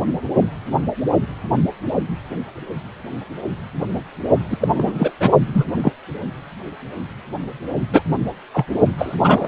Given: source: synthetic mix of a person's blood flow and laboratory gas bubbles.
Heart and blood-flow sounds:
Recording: Doppler ultrasound of blood flow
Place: precordium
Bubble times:
4.50-4.68 s: bubbles
4.74-5.12 s: bubbles
5.19-5.30 s: bubbles
5.54-5.64 s: bubbles
5.67-5.73 s: bubbles
5.77-5.92 s: bubbles
7.92-8.02 s: bubbles
8.54-8.66 s: bubbles
8.98-9.16 s: bubbles
9.23-9.48 s: bubbles
From the record:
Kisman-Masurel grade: 233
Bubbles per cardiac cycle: several, 3 to 8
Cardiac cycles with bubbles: 50 to 99%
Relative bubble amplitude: loud (0.450 to 0.775)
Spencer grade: 3 (all of the cardiac periods contain showers or single bubble signals, but not dominating or overriding the cardiac motion signals)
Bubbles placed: only in the low amplitude regions of the cardiac cycle

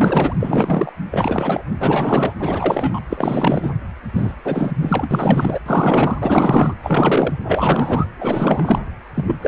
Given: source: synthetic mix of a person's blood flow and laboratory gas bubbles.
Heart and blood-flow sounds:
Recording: Doppler ultrasound of blood flow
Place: precordium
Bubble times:
0.00-0.36 s: bubbles
0.39-0.92 s: bubbles
1.10-1.64 s: bubbles
1.78-2.35 s: bubbles
2.41-3.00 s: bubbles
3.10-3.73 s: bubbles
4.13-4.34 s: bubbles
4.45-5.08 s: bubbles
5.11-5.59 s: bubbles
5.66-6.17 s: bubbles
6.21-6.74 s: bubbles
6.83-7.38 s: bubbles
7.45-8.06 s: bubbles
8.20-8.79 s: bubbles
9.14-9.35 s: bubbles
9.41-9.48 s: bubbles
From the record:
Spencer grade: 4 (maximum detectable bubble signal sounding continuously throughout systole and diastole of every cardiac period, and overriding the amplitude of the normal cardiac signals)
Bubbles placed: anywhere in the cardiac cycle

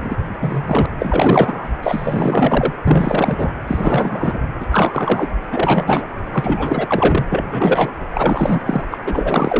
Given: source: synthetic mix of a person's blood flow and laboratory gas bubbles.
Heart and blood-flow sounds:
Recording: Doppler ultrasound of blood flow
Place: precordium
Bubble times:
0.00-0.16 s: bubbles
0.41-0.86 s: bubbles
0.99-1.70 s: bubbles
1.82-2.74 s: bubbles
2.85-3.51 s: bubbles
3.67-4.38 s: bubbles
4.60-4.67 s: bubbles
4.71-5.28 s: bubbles
5.52-6.07 s: bubbles
6.32-7.90 s: bubbles
8.12-8.61 s: bubbles
8.65-8.87 s: bubbles
8.91-8.98 s: bubbles
9.07-9.60 s: bubbles
From the record:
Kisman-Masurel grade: 444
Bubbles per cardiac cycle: continuous sound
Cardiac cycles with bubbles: 100%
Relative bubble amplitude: maximal (0.775 to 0.999)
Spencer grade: 4 (maximum detectable bubble signal sounding continuously throughout systole and diastole of every cardiac period, and overriding the amplitude of the normal cardiac signals)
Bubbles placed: anywhere in the cardiac cycle

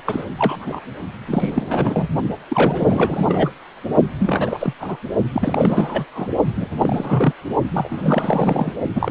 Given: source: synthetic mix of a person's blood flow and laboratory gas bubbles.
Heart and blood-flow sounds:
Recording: Doppler ultrasound of blood flow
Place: precordium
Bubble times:
0.05-0.24 s: bubbles
0.37-0.80 s: bubbles
1.27-2.08 s: bubbles
2.48-3.50 s: bubbles
4.19-4.73 s: bubbles
4.80-4.97 s: bubbles
5.33-6.06 s: bubbles
6.15-6.28 s: bubbles
6.55-6.67 s: bubbles
6.78-7.33 s: bubbles
7.72-8.72 s: bubbles
8.94-9.11 s: bubbles
From the record:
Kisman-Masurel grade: 332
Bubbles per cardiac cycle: rolling drumbeat, 9 or more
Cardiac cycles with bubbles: 50 to 99%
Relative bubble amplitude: moderate (0.250 to 0.450)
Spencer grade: 3 (all of the cardiac periods contain showers or single bubble signals, but not dominating or overriding the cardiac motion signals)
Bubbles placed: only in the low amplitude regions of the cardiac cycle

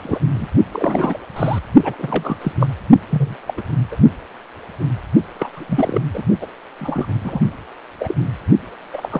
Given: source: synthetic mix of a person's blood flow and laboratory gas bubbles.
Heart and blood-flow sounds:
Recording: Doppler ultrasound of blood flow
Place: precordium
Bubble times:
0.00-0.20 s: bubbles
0.34-0.48 s: bubbles
0.72-1.20 s: bubbles
1.36-1.59 s: bubbles
1.82-1.95 s: bubbles
1.99-2.36 s: bubbles
2.41-2.52 s: bubbles
2.59-2.67 s: bubbles
3.09-3.36 s: bubbles
3.47-3.53 s: bubbles
3.57-3.61 s: bubbles
3.91-3.96 s: bubbles
5.35-6.01 s: bubbles
6.13-6.23 s: bubbles
6.41-6.47 s: bubbles
6.79-7.15 s: bubbles
7.24-7.40 s: bubbles
7.99-8.14 s: bubbles
8.93-9.09 s: bubbles
9.11-9.20 s: bubbles
From the record:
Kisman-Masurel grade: 242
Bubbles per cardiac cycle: several, 3 to 8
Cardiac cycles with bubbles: 100%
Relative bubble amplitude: moderate (0.250 to 0.450)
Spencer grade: 3 (all of the cardiac periods contain showers or single bubble signals, but not dominating or overriding the cardiac motion signals)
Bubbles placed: only in the low amplitude regions of the cardiac cycle

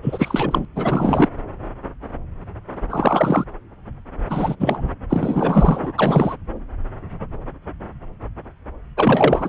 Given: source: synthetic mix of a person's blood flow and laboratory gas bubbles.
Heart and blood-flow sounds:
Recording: Doppler ultrasound of blood flow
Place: subclavian vein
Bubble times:
0.02-0.65 s: bubbles
0.75-1.28 s: bubbles
2.90-3.45 s: bubbles
4.27-4.56 s: bubbles
4.59-4.89 s: bubbles
5.09-5.92 s: bubbles
5.98-6.36 s: bubbles
8.97-9.49 s: bubbles
From the record:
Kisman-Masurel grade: 332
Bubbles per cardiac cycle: rolling drumbeat, 9 or more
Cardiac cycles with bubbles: 50 to 99%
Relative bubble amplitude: moderate (0.250 to 0.450)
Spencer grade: 3 (all of the cardiac periods contain showers or single bubble signals, but not dominating or overriding the cardiac motion signals)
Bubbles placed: anywhere in the cardiac cycle

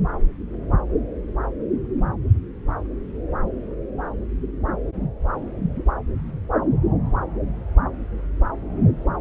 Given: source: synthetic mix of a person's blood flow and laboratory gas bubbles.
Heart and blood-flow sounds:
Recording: Doppler ultrasound of blood flow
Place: subclavian vein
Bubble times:
no bubbles
From the record:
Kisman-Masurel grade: 000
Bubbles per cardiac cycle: 0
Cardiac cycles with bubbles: 0%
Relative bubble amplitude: no bubbles discernible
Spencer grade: 0 (complete lack of bubble signals)

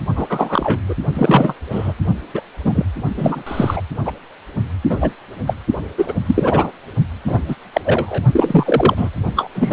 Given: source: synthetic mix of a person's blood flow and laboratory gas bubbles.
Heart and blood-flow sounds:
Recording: Doppler ultrasound of blood flow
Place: precordium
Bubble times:
0.15-0.80 s: bubbles
0.88-0.94 s: bubbles
1.14-1.54 s: bubbles
1.71-1.93 s: bubbles
2.34-2.42 s: bubbles
2.65-2.85 s: bubbles
3.16-3.43 s: bubbles
3.46-3.82 s: bubbles
4.06-4.12 s: bubbles
4.89-5.12 s: bubbles
5.47-5.54 s: bubbles
5.98-6.14 s: bubbles
6.27-6.71 s: bubbles
7.27-7.56 s: bubbles
7.73-7.81 s: bubbles
7.85-8.22 s: bubbles
8.31-9.09 s: bubbles
9.35-9.50 s: bubbles
9.55-9.73 s: bubbles
From the record:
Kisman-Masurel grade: 243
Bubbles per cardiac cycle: several, 3 to 8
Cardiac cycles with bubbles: 100%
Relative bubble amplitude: loud (0.450 to 0.775)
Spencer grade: 3 (all of the cardiac periods contain showers or single bubble signals, but not dominating or overriding the cardiac motion signals)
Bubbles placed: only in the low amplitude regions of the cardiac cycle

